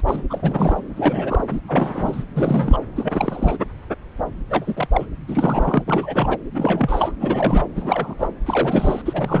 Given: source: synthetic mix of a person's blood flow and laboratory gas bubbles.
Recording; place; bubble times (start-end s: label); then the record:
Doppler ultrasound of blood flow; subclavian vein
0.06-0.24 s: bubbles
0.29-0.82 s: bubbles
0.95-1.44 s: bubbles
1.49-1.60 s: bubbles
1.65-2.23 s: bubbles
2.34-2.78 s: bubbles
2.96-3.57 s: bubbles
4.50-4.88 s: bubbles
4.92-5.06 s: bubbles
5.27-5.83 s: bubbles
5.88-6.38 s: bubbles
6.54-7.12 s: bubbles
7.20-7.67 s: bubbles
7.75-8.14 s: bubbles
8.19-8.28 s: bubbles
8.45-9.02 s: bubbles
9.05-9.40 s: bubbles
From the record:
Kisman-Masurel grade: 332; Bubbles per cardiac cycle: rolling drumbeat, 9 or more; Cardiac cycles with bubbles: 50 to 99%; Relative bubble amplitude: moderate (0.250 to 0.450); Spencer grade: 3 (all of the cardiac periods contain showers or single bubble signals, but not dominating or overriding the cardiac motion signals); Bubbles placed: anywhere in the cardiac cycle